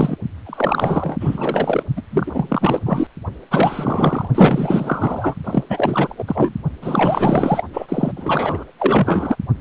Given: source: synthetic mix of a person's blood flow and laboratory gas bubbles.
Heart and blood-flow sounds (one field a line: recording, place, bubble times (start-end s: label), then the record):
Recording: Doppler ultrasound of blood flow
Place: precordium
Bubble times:
0.00-0.16 s: bubbles
0.45-1.83 s: bubbles
1.96-2.02 s: bubbles
2.11-2.80 s: bubbles
2.86-3.07 s: bubbles
3.51-4.28 s: bubbles
4.35-5.35 s: bubbles
5.44-5.64 s: bubbles
5.69-6.16 s: bubbles
6.18-6.24 s: bubbles
6.27-6.54 s: bubbles
6.82-7.63 s: bubbles
7.73-8.12 s: bubbles
8.16-8.65 s: bubbles
8.79-9.36 s: bubbles
From the record:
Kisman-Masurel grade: 444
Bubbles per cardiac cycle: continuous sound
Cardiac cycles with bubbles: 100%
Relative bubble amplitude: maximal (0.775 to 0.999)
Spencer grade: 4 (maximum detectable bubble signal sounding continuously throughout systole and diastole of every cardiac period, and overriding the amplitude of the normal cardiac signals)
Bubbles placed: only in the low amplitude regions of the cardiac cycle